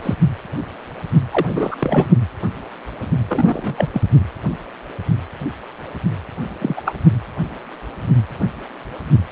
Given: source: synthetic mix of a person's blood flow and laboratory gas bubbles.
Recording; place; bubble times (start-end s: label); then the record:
Doppler ultrasound of blood flow; precordium
0.03-0.15 s: bubbles
1.31-1.75 s: bubbles
1.79-2.06 s: bubbles
3.28-3.90 s: bubbles
3.93-4.03 s: bubbles
6.59-6.81 s: bubbles
6.84-6.93 s: bubbles
From the record:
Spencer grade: 2 (many but less than half of the cardiac periods contain bubble signals, singularly or in groups); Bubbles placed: anywhere in the cardiac cycle